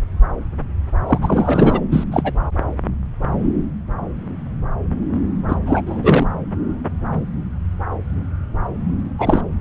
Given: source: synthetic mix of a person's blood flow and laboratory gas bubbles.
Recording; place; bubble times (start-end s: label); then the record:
Doppler ultrasound of blood flow; subclavian vein
1.06-1.19 s: bubbles
1.22-1.80 s: bubbles
1.90-2.04 s: bubbles
2.11-2.32 s: bubbles
5.48-5.57 s: bubbles
5.66-5.83 s: bubbles
5.86-6.27 s: bubbles
9.18-9.42 s: bubbles
From the record:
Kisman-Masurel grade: 223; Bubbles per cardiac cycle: several, 3 to 8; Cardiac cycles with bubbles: 10 to 50%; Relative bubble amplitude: loud (0.450 to 0.775); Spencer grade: 2 (many but less than half of the cardiac periods contain bubble signals, singularly or in groups); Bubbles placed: anywhere in the cardiac cycle